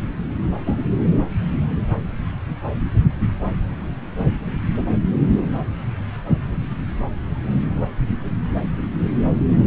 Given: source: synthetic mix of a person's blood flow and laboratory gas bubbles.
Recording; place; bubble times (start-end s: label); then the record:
Doppler ultrasound of blood flow; subclavian vein
0.66-0.79 s: bubbles
From the record:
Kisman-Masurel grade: 112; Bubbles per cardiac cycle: 1 to 2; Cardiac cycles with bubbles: 1 to 10%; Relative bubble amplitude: moderate (0.250 to 0.450); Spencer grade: 1 (occasional bubble signal discernible with the cardiac motion signal, with majority of cardiac periods free of bubbles); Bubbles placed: anywhere in the cardiac cycle